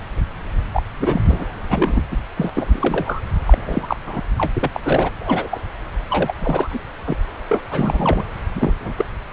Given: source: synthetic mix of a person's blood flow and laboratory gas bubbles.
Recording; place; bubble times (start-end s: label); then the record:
Doppler ultrasound of blood flow; subclavian vein
0.72-0.82 s: bubbles
1.00-1.21 s: bubbles
1.26-1.46 s: bubbles
1.69-2.02 s: bubbles
2.11-2.17 s: bubbles
2.37-2.50 s: bubbles
2.55-3.21 s: bubbles
3.47-3.96 s: bubbles
4.06-4.21 s: bubbles
4.38-4.52 s: bubbles
4.55-4.69 s: bubbles
4.74-4.80 s: bubbles
4.83-5.11 s: bubbles
5.21-5.48 s: bubbles
5.50-5.61 s: bubbles
6.09-6.34 s: bubbles
6.40-6.80 s: bubbles
7.07-7.16 s: bubbles
7.49-7.60 s: bubbles
7.71-8.24 s: bubbles
8.54-8.73 s: bubbles
8.79-8.92 s: bubbles
8.97-9.05 s: bubbles
From the record:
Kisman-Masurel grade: 242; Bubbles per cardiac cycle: several, 3 to 8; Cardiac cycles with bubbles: 100%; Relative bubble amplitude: moderate (0.250 to 0.450); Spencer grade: 3 (all of the cardiac periods contain showers or single bubble signals, but not dominating or overriding the cardiac motion signals); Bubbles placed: anywhere in the cardiac cycle